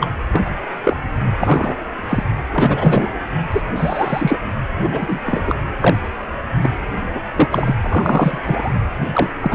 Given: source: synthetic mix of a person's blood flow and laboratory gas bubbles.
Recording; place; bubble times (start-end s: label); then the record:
Doppler ultrasound of blood flow; precordium
0.00-0.08 s: bubbles
0.32-0.50 s: bubbles
0.83-0.97 s: bubbles
1.39-1.76 s: bubbles
2.08-2.23 s: bubbles
2.51-3.10 s: bubbles
3.52-3.62 s: bubbles
3.75-4.37 s: bubbles
4.82-5.20 s: bubbles
5.25-5.55 s: bubbles
5.80-5.97 s: bubbles
6.62-6.73 s: bubbles
7.14-7.21 s: bubbles
7.36-7.48 s: bubbles
7.50-7.75 s: bubbles
7.83-8.73 s: bubbles
9.13-9.30 s: bubbles
9.40-9.55 s: bubbles
From the record:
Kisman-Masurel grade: 243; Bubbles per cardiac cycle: several, 3 to 8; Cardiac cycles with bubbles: 100%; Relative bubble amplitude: loud (0.450 to 0.775); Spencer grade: 3 (all of the cardiac periods contain showers or single bubble signals, but not dominating or overriding the cardiac motion signals); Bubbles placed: anywhere in the cardiac cycle